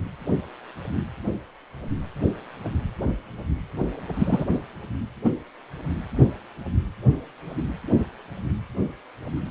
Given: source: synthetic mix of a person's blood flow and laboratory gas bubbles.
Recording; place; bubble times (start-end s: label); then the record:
Doppler ultrasound of blood flow; precordium
4.13-4.45 s: bubbles
5.25-5.30 s: bubbles
From the record:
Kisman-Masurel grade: 113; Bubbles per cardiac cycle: 1 to 2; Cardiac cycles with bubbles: 1 to 10%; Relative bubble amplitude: loud (0.450 to 0.775); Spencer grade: 1 (occasional bubble signal discernible with the cardiac motion signal, with majority of cardiac periods free of bubbles); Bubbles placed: anywhere in the cardiac cycle